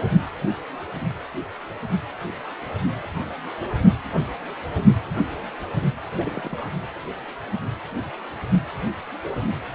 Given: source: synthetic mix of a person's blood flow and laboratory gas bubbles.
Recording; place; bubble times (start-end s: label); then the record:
Doppler ultrasound of blood flow; precordium
6.17-6.70 s: bubbles
From the record:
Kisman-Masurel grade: 211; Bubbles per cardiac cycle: several, 3 to 8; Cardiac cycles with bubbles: 1 to 10%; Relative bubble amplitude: barely perceptible (0.100 to 0.250); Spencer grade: 1 (occasional bubble signal discernible with the cardiac motion signal, with majority of cardiac periods free of bubbles); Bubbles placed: anywhere in the cardiac cycle